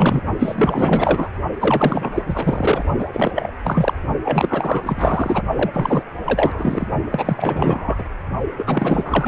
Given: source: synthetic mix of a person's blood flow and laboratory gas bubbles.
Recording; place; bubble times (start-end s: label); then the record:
Doppler ultrasound of blood flow; precordium
0.00-0.21 s: bubbles
0.39-1.30 s: bubbles
1.59-2.86 s: bubbles
2.98-3.05 s: bubbles
3.13-3.32 s: bubbles
3.35-3.51 s: bubbles
3.64-3.94 s: bubbles
4.24-5.42 s: bubbles
5.56-6.03 s: bubbles
6.25-6.87 s: bubbles
7.12-8.04 s: bubbles
8.58-9.28 s: bubbles
From the record:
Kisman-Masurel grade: 444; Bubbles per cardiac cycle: continuous sound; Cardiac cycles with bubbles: 100%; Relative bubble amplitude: maximal (0.775 to 0.999); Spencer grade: 4 (maximum detectable bubble signal sounding continuously throughout systole and diastole of every cardiac period, and overriding the amplitude of the normal cardiac signals); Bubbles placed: only in the low amplitude regions of the cardiac cycle